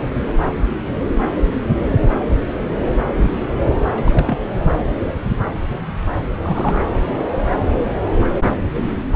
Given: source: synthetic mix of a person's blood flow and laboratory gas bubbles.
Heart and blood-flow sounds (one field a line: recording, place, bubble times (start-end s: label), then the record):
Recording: Doppler ultrasound of blood flow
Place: subclavian vein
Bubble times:
0.00-0.06 s: bubbles
3.93-4.38 s: bubbles
4.47-4.62 s: bubbles
6.42-6.84 s: bubbles
From the record:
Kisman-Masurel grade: 221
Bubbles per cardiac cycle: several, 3 to 8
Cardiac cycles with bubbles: 10 to 50%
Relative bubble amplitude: barely perceptible (0.100 to 0.250)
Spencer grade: 2 (many but less than half of the cardiac periods contain bubble signals, singularly or in groups)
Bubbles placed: anywhere in the cardiac cycle